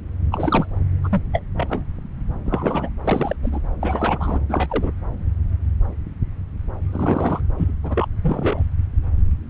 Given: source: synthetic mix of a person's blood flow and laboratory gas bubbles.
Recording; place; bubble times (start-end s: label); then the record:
Doppler ultrasound of blood flow; subclavian vein
0.31-0.66 s: bubbles
1.04-1.09 s: bubbles
1.11-1.21 s: bubbles
1.33-1.42 s: bubbles
1.57-1.67 s: bubbles
1.70-1.84 s: bubbles
2.46-2.89 s: bubbles
3.04-3.35 s: bubbles
3.43-3.59 s: bubbles
3.80-4.38 s: bubbles
4.48-4.67 s: bubbles
4.70-4.91 s: bubbles
6.92-7.42 s: bubbles
7.58-7.72 s: bubbles
7.83-8.07 s: bubbles
8.21-8.62 s: bubbles
From the record:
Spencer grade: 3 (all of the cardiac periods contain showers or single bubble signals, but not dominating or overriding the cardiac motion signals); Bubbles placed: anywhere in the cardiac cycle